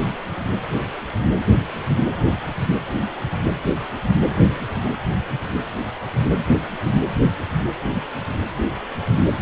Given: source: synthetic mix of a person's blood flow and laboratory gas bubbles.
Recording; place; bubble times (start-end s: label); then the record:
Doppler ultrasound of blood flow; precordium
4.29-4.43 s: bubbles
4.86-4.88 s: bubbles
4.93-4.96 s: bubbles
From the record:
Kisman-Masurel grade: 211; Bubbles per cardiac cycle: several, 3 to 8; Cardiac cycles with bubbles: 1 to 10%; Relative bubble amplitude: barely perceptible (0.100 to 0.250); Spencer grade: 1 (occasional bubble signal discernible with the cardiac motion signal, with majority of cardiac periods free of bubbles); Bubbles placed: anywhere in the cardiac cycle